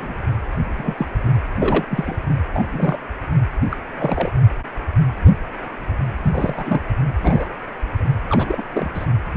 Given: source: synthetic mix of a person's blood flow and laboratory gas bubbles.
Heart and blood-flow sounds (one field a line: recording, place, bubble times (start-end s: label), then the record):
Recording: Doppler ultrasound of blood flow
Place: precordium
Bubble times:
0.00-0.15 s: bubbles
0.77-1.06 s: bubbles
1.23-1.31 s: bubbles
1.59-1.85 s: bubbles
1.90-2.17 s: bubbles
2.25-2.34 s: bubbles
2.54-2.65 s: bubbles
2.71-2.99 s: bubbles
3.69-3.77 s: bubbles
3.99-4.32 s: bubbles
6.22-6.82 s: bubbles
7.22-7.55 s: bubbles
8.29-8.63 s: bubbles
8.73-8.90 s: bubbles
8.94-9.06 s: bubbles
From the record:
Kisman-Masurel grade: 232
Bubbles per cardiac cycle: several, 3 to 8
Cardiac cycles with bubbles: 50 to 99%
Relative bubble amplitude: moderate (0.250 to 0.450)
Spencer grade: 3 (all of the cardiac periods contain showers or single bubble signals, but not dominating or overriding the cardiac motion signals)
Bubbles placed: anywhere in the cardiac cycle